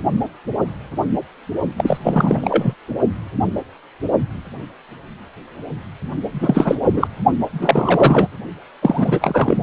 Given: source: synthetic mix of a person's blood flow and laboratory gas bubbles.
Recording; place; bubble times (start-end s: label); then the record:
Doppler ultrasound of blood flow; precordium
1.77-1.98 s: bubbles
2.04-2.74 s: bubbles
6.33-6.75 s: bubbles
6.83-7.08 s: bubbles
7.53-8.28 s: bubbles
8.82-9.63 s: bubbles
From the record:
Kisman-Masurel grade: 333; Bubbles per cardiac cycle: rolling drumbeat, 9 or more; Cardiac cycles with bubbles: 50 to 99%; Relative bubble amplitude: loud (0.450 to 0.775); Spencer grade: 3 (all of the cardiac periods contain showers or single bubble signals, but not dominating or overriding the cardiac motion signals); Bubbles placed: only in the low amplitude regions of the cardiac cycle